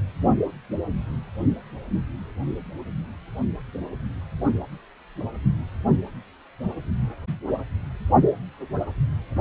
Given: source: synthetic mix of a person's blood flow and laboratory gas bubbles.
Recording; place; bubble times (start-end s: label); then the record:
Doppler ultrasound of blood flow; precordium
no bubbles
From the record:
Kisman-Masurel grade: 000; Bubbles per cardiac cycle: 0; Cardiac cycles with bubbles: 0%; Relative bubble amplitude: no bubbles discernible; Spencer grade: 0 (complete lack of bubble signals)